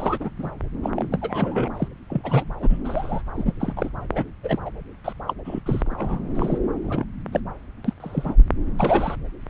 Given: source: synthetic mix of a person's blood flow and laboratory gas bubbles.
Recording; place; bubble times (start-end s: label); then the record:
Doppler ultrasound of blood flow; subclavian vein
0.00-0.29 s: bubbles
0.39-0.51 s: bubbles
0.83-0.90 s: bubbles
0.96-1.08 s: bubbles
1.11-1.68 s: bubbles
1.76-1.88 s: bubbles
2.10-2.44 s: bubbles
2.60-2.79 s: bubbles
2.84-3.22 s: bubbles
3.36-3.53 s: bubbles
3.59-3.73 s: bubbles
3.77-3.90 s: bubbles
4.14-4.24 s: bubbles
4.43-4.59 s: bubbles
4.66-4.70 s: bubbles
5.04-5.13 s: bubbles
5.27-5.33 s: bubbles
5.45-5.60 s: bubbles
5.66-5.81 s: bubbles
5.86-6.21 s: bubbles
6.35-6.58 s: bubbles
6.84-7.04 s: bubbles
7.32-7.40 s: bubbles
7.84-7.94 s: bubbles
8.00-8.35 s: bubbles
8.76-9.15 s: bubbles
9.46-9.50 s: bubbles
From the record:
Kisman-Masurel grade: 242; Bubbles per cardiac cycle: several, 3 to 8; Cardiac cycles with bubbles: 100%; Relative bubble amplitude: moderate (0.250 to 0.450); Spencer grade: 3 (all of the cardiac periods contain showers or single bubble signals, but not dominating or overriding the cardiac motion signals); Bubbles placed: anywhere in the cardiac cycle